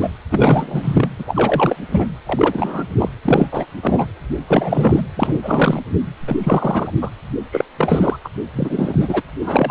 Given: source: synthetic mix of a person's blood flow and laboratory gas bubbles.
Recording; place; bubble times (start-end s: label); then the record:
Doppler ultrasound of blood flow; precordium
0.00-0.08 s: bubbles
0.30-1.09 s: bubbles
1.19-1.77 s: bubbles
1.91-2.07 s: bubbles
2.26-2.84 s: bubbles
2.98-3.09 s: bubbles
3.25-3.47 s: bubbles
3.52-3.66 s: bubbles
3.82-4.06 s: bubbles
4.48-5.05 s: bubbles
5.15-5.39 s: bubbles
5.42-5.82 s: bubbles
6.27-6.36 s: bubbles
6.43-6.91 s: bubbles
7.01-7.09 s: bubbles
7.52-7.64 s: bubbles
7.77-8.16 s: bubbles
8.24-8.29 s: bubbles
8.54-9.22 s: bubbles
9.40-9.71 s: bubbles
From the record:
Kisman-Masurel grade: 343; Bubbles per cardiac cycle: rolling drumbeat, 9 or more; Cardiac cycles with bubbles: 100%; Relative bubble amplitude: loud (0.450 to 0.775); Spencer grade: 3 (all of the cardiac periods contain showers or single bubble signals, but not dominating or overriding the cardiac motion signals); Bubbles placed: anywhere in the cardiac cycle